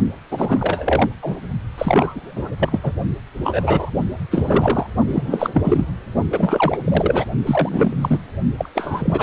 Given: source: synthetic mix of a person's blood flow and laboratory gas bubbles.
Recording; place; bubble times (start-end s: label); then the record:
Doppler ultrasound of blood flow; precordium
0.30-1.08 s: bubbles
1.22-1.38 s: bubbles
1.78-2.53 s: bubbles
2.59-2.79 s: bubbles
2.83-2.92 s: bubbles
3.44-3.91 s: bubbles
4.31-4.87 s: bubbles
5.07-5.23 s: bubbles
5.26-5.50 s: bubbles
5.54-5.85 s: bubbles
6.30-6.79 s: bubbles
6.84-7.25 s: bubbles
7.46-7.93 s: bubbles
8.01-8.19 s: bubbles
8.57-8.69 s: bubbles
8.74-9.23 s: bubbles
From the record:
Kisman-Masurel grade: 343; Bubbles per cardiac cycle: rolling drumbeat, 9 or more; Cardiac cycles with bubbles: 100%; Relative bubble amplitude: loud (0.450 to 0.775); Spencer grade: 3 (all of the cardiac periods contain showers or single bubble signals, but not dominating or overriding the cardiac motion signals); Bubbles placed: only in the low amplitude regions of the cardiac cycle